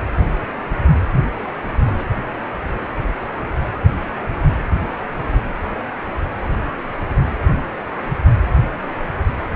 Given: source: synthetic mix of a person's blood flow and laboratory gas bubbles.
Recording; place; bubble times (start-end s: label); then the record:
Doppler ultrasound of blood flow; precordium
1.46-1.55 s: bubbles
1.85-2.05 s: bubbles
From the record:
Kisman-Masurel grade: 221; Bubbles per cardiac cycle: several, 3 to 8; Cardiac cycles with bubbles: 10 to 50%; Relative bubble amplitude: barely perceptible (0.100 to 0.250); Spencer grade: 2 (many but less than half of the cardiac periods contain bubble signals, singularly or in groups); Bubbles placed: anywhere in the cardiac cycle